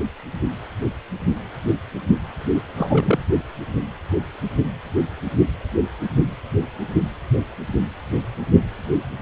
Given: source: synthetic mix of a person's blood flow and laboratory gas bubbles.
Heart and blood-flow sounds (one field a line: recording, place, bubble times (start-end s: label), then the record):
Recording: Doppler ultrasound of blood flow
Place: precordium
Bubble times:
2.76-3.23 s: bubbles
From the record:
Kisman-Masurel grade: 222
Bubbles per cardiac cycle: several, 3 to 8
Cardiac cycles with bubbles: 10 to 50%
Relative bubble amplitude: moderate (0.250 to 0.450)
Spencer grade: 2 (many but less than half of the cardiac periods contain bubble signals, singularly or in groups)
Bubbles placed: anywhere in the cardiac cycle